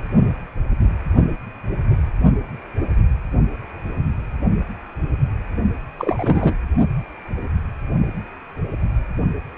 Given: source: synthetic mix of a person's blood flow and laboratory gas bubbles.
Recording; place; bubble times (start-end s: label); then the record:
Doppler ultrasound of blood flow; precordium
5.99-6.54 s: bubbles
From the record:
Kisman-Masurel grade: 212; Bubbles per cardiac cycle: several, 3 to 8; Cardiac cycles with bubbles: 1 to 10%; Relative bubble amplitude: moderate (0.250 to 0.450); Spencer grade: 1 (occasional bubble signal discernible with the cardiac motion signal, with majority of cardiac periods free of bubbles); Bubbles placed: only in the low amplitude regions of the cardiac cycle